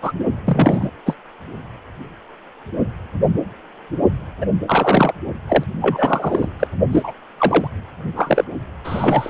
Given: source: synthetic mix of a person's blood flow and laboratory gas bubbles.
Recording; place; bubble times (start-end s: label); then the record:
Doppler ultrasound of blood flow; precordium
0.01-0.12 s: bubbles
0.45-0.91 s: bubbles
1.06-1.15 s: bubbles
4.41-4.46 s: bubbles
4.67-5.12 s: bubbles
5.48-5.63 s: bubbles
5.81-6.48 s: bubbles
6.59-6.67 s: bubbles
6.92-7.13 s: bubbles
7.38-7.67 s: bubbles
8.15-8.44 s: bubbles
8.84-9.29 s: bubbles
From the record:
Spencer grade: 3 (all of the cardiac periods contain showers or single bubble signals, but not dominating or overriding the cardiac motion signals); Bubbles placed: only in the low amplitude regions of the cardiac cycle